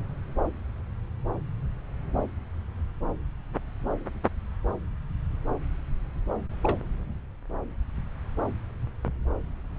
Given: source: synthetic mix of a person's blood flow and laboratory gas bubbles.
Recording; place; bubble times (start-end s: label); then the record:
Doppler ultrasound of blood flow; subclavian vein
6.63-6.77 s: bubbles
From the record:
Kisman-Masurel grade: 111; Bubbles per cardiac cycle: 1 to 2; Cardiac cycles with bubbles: 1 to 10%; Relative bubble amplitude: barely perceptible (0.100 to 0.250); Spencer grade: 1 (occasional bubble signal discernible with the cardiac motion signal, with majority of cardiac periods free of bubbles); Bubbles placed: anywhere in the cardiac cycle